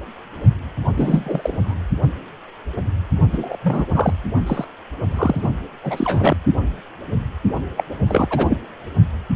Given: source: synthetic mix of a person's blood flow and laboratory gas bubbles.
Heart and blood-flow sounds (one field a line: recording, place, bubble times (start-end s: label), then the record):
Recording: Doppler ultrasound of blood flow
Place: precordium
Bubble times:
0.97-1.74 s: bubbles
3.32-3.56 s: bubbles
3.62-3.85 s: bubbles
3.94-4.13 s: bubbles
4.46-4.65 s: bubbles
5.12-5.48 s: bubbles
5.83-6.37 s: bubbles
7.77-7.84 s: bubbles
8.08-8.57 s: bubbles
From the record:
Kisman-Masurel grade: 332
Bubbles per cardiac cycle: rolling drumbeat, 9 or more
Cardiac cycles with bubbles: 50 to 99%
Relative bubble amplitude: moderate (0.250 to 0.450)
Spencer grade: 3 (all of the cardiac periods contain showers or single bubble signals, but not dominating or overriding the cardiac motion signals)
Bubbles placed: only in the low amplitude regions of the cardiac cycle